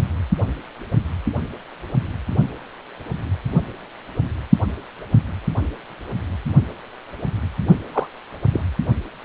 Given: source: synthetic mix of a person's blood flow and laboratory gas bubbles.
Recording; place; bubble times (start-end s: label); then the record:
Doppler ultrasound of blood flow; precordium
7.93-8.07 s: bubbles
8.52-8.61 s: bubbles
From the record:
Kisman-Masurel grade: 112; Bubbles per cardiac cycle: 1 to 2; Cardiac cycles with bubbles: 1 to 10%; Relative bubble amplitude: moderate (0.250 to 0.450); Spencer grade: 1 (occasional bubble signal discernible with the cardiac motion signal, with majority of cardiac periods free of bubbles); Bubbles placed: only in the low amplitude regions of the cardiac cycle